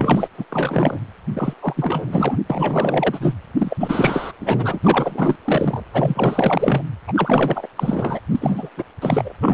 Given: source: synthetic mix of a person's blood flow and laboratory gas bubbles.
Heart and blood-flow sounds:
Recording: Doppler ultrasound of blood flow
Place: precordium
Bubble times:
0.00-0.28 s: bubbles
0.38-0.45 s: bubbles
0.50-0.99 s: bubbles
1.33-1.54 s: bubbles
1.60-2.36 s: bubbles
2.50-3.34 s: bubbles
3.57-3.76 s: bubbles
3.79-4.33 s: bubbles
4.40-4.79 s: bubbles
4.83-5.36 s: bubbles
5.45-5.83 s: bubbles
5.92-6.82 s: bubbles
7.08-7.69 s: bubbles
7.76-8.21 s: bubbles
8.30-8.69 s: bubbles
8.77-8.84 s: bubbles
9.01-9.33 s: bubbles
9.40-9.54 s: bubbles
From the record:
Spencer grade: 4 (maximum detectable bubble signal sounding continuously throughout systole and diastole of every cardiac period, and overriding the amplitude of the normal cardiac signals)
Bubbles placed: anywhere in the cardiac cycle

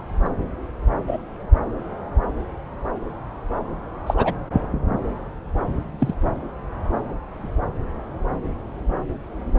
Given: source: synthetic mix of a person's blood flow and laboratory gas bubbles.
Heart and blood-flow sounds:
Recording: Doppler ultrasound of blood flow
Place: subclavian vein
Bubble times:
0.25-0.30 s: bubbles
1.07-1.19 s: bubbles
4.06-4.14 s: bubbles
4.17-4.34 s: bubbles
5.98-6.14 s: bubbles
From the record:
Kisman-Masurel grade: 123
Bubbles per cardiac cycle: 1 to 2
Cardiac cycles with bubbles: 10 to 50%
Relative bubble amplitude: loud (0.450 to 0.775)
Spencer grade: 2 (many but less than half of the cardiac periods contain bubble signals, singularly or in groups)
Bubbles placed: anywhere in the cardiac cycle

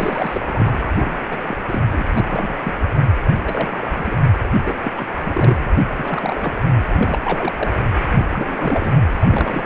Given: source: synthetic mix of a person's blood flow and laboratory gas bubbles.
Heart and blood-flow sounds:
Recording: Doppler ultrasound of blood flow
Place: precordium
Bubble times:
0.00-0.95 s: bubbles
0.99-1.19 s: bubbles
1.25-1.38 s: bubbles
1.45-1.57 s: bubbles
1.68-1.82 s: bubbles
1.92-2.04 s: bubbles
2.14-2.58 s: bubbles
2.63-2.74 s: bubbles
3.27-3.36 s: bubbles
3.44-4.20 s: bubbles
4.64-4.79 s: bubbles
4.84-4.91 s: bubbles
4.95-5.05 s: bubbles
5.09-5.22 s: bubbles
5.25-5.67 s: bubbles
5.98-6.62 s: bubbles
6.75-6.84 s: bubbles
6.92-7.20 s: bubbles
7.25-7.53 s: bubbles
7.55-7.71 s: bubbles
8.19-8.97 s: bubbles
9.12-9.66 s: bubbles
From the record:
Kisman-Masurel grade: 342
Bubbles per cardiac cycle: rolling drumbeat, 9 or more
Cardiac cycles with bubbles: 100%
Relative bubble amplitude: moderate (0.250 to 0.450)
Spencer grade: 3 (all of the cardiac periods contain showers or single bubble signals, but not dominating or overriding the cardiac motion signals)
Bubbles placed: anywhere in the cardiac cycle

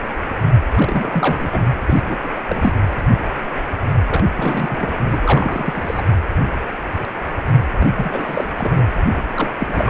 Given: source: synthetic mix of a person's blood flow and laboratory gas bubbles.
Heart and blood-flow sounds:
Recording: Doppler ultrasound of blood flow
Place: precordium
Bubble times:
0.73-1.62 s: bubbles
1.85-2.16 s: bubbles
2.24-2.29 s: bubbles
2.35-2.40 s: bubbles
2.48-2.73 s: bubbles
4.09-4.27 s: bubbles
4.33-4.93 s: bubbles
5.12-6.03 s: bubbles
7.80-7.87 s: bubbles
7.96-8.48 s: bubbles
8.57-8.88 s: bubbles
9.04-9.25 s: bubbles
9.37-9.51 s: bubbles
9.59-9.90 s: bubbles
From the record:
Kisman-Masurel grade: 332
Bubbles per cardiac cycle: rolling drumbeat, 9 or more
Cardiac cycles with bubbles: 50 to 99%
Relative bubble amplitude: moderate (0.250 to 0.450)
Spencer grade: 3 (all of the cardiac periods contain showers or single bubble signals, but not dominating or overriding the cardiac motion signals)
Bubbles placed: anywhere in the cardiac cycle

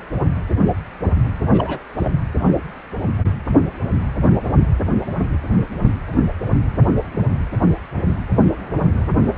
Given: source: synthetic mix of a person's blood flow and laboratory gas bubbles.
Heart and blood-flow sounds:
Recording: Doppler ultrasound of blood flow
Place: precordium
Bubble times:
1.50-1.79 s: bubbles
1.98-2.14 s: bubbles
From the record:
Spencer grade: 1 (occasional bubble signal discernible with the cardiac motion signal, with majority of cardiac periods free of bubbles)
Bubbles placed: anywhere in the cardiac cycle

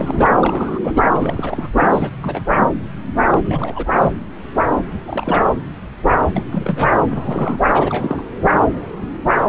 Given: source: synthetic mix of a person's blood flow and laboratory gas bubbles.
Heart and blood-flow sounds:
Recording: Doppler ultrasound of blood flow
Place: subclavian vein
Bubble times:
0.00-0.30 s: bubbles
0.40-0.80 s: bubbles
0.83-0.93 s: bubbles
0.96-1.02 s: bubbles
1.11-1.70 s: bubbles
1.77-2.10 s: bubbles
2.22-2.42 s: bubbles
3.32-3.86 s: bubbles
5.07-5.45 s: bubbles
6.33-6.44 s: bubbles
6.51-6.91 s: bubbles
7.05-7.58 s: bubbles
7.72-8.22 s: bubbles
From the record:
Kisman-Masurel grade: 332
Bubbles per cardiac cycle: rolling drumbeat, 9 or more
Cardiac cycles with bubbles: 50 to 99%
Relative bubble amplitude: moderate (0.250 to 0.450)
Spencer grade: 3 (all of the cardiac periods contain showers or single bubble signals, but not dominating or overriding the cardiac motion signals)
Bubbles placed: anywhere in the cardiac cycle

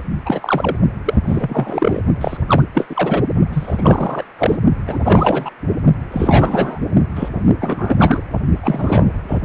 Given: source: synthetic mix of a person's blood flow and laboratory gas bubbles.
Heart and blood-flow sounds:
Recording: Doppler ultrasound of blood flow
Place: precordium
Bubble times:
0.25-0.77 s: bubbles
1.04-1.14 s: bubbles
1.26-2.01 s: bubbles
2.21-2.37 s: bubbles
2.47-2.62 s: bubbles
2.74-3.23 s: bubbles
3.52-4.24 s: bubbles
4.39-4.58 s: bubbles
4.87-5.51 s: bubbles
6.12-6.81 s: bubbles
7.15-7.29 s: bubbles
7.60-7.96 s: bubbles
7.99-8.21 s: bubbles
8.62-9.12 s: bubbles
9.27-9.38 s: bubbles
From the record:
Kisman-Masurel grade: 343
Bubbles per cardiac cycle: rolling drumbeat, 9 or more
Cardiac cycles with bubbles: 100%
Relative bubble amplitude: loud (0.450 to 0.775)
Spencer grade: 3 (all of the cardiac periods contain showers or single bubble signals, but not dominating or overriding the cardiac motion signals)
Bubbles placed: only in the low amplitude regions of the cardiac cycle

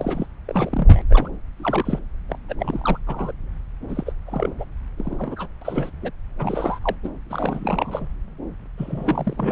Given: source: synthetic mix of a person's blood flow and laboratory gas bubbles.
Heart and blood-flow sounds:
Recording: Doppler ultrasound of blood flow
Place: subclavian vein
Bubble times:
0.00-0.26 s: bubbles
0.46-1.02 s: bubbles
1.09-1.31 s: bubbles
1.56-1.99 s: bubbles
2.29-2.39 s: bubbles
2.48-2.56 s: bubbles
2.59-2.99 s: bubbles
3.07-3.33 s: bubbles
3.89-4.13 s: bubbles
4.25-4.53 s: bubbles
4.58-4.65 s: bubbles
4.97-5.48 s: bubbles
5.61-5.90 s: bubbles
6.02-6.11 s: bubbles
6.38-6.79 s: bubbles
6.82-6.96 s: bubbles
7.03-7.09 s: bubbles
7.29-8.08 s: bubbles
8.78-9.52 s: bubbles
From the record:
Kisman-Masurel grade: 342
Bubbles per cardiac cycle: rolling drumbeat, 9 or more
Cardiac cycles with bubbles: 100%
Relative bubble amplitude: moderate (0.250 to 0.450)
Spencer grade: 3 (all of the cardiac periods contain showers or single bubble signals, but not dominating or overriding the cardiac motion signals)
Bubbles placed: anywhere in the cardiac cycle

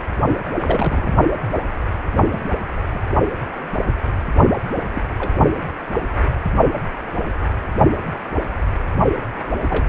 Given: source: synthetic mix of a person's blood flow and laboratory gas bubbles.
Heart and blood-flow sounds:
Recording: Doppler ultrasound of blood flow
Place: precordium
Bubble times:
0.59-1.15 s: bubbles
2.32-2.43 s: bubbles
2.94-3.02 s: bubbles
4.94-5.02 s: bubbles
5.18-5.33 s: bubbles
9.61-9.88 s: bubbles
From the record:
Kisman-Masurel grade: 121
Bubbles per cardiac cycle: 1 to 2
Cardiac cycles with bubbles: 10 to 50%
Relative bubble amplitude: barely perceptible (0.100 to 0.250)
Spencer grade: 2 (many but less than half of the cardiac periods contain bubble signals, singularly or in groups)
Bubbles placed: only in the low amplitude regions of the cardiac cycle

